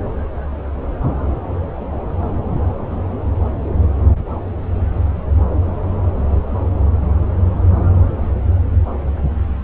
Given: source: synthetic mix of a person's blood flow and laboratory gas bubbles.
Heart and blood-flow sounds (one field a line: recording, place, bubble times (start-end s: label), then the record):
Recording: Doppler ultrasound of blood flow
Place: subclavian vein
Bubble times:
no bubbles
From the record:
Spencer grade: 0 (complete lack of bubble signals)